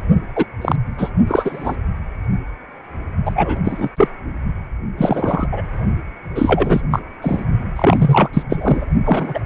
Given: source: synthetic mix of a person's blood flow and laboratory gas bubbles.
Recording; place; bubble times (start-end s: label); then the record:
Doppler ultrasound of blood flow; precordium
0.35-0.46 s: bubbles
0.61-0.76 s: bubbles
0.98-1.10 s: bubbles
1.27-1.76 s: bubbles
3.25-3.57 s: bubbles
3.65-3.89 s: bubbles
3.96-4.08 s: bubbles
4.98-5.48 s: bubbles
5.52-5.62 s: bubbles
6.35-6.82 s: bubbles
6.91-7.00 s: bubbles
7.21-7.46 s: bubbles
7.75-8.29 s: bubbles
8.33-8.43 s: bubbles
8.49-8.85 s: bubbles
9.05-9.39 s: bubbles
From the record:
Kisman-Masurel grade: 233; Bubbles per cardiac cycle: several, 3 to 8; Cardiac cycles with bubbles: 50 to 99%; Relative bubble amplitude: loud (0.450 to 0.775); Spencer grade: 3 (all of the cardiac periods contain showers or single bubble signals, but not dominating or overriding the cardiac motion signals); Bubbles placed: only in the low amplitude regions of the cardiac cycle